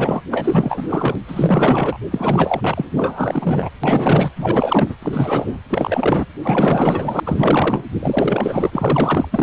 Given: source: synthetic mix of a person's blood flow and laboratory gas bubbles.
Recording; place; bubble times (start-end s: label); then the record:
Doppler ultrasound of blood flow; precordium
0.00-0.21 s: bubbles
0.31-1.16 s: bubbles
1.27-1.97 s: bubbles
2.11-2.86 s: bubbles
2.96-3.70 s: bubbles
3.83-4.32 s: bubbles
4.36-4.95 s: bubbles
5.02-5.60 s: bubbles
5.70-6.25 s: bubbles
6.42-7.20 s: bubbles
7.25-7.84 s: bubbles
8.00-9.29 s: bubbles
9.31-9.43 s: bubbles
From the record:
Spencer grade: 4 (maximum detectable bubble signal sounding continuously throughout systole and diastole of every cardiac period, and overriding the amplitude of the normal cardiac signals); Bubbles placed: anywhere in the cardiac cycle